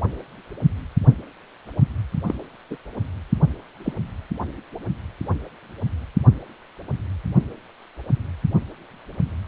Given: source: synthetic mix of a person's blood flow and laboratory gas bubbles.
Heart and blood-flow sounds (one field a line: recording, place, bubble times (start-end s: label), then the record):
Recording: Doppler ultrasound of blood flow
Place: precordium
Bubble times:
2.26-2.34 s: bubbles
2.70-2.76 s: bubbles
3.84-3.92 s: bubbles
From the record:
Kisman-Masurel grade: 122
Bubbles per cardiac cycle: 1 to 2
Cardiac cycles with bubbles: 10 to 50%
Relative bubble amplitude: moderate (0.250 to 0.450)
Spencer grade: 2 (many but less than half of the cardiac periods contain bubble signals, singularly or in groups)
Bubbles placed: only in the low amplitude regions of the cardiac cycle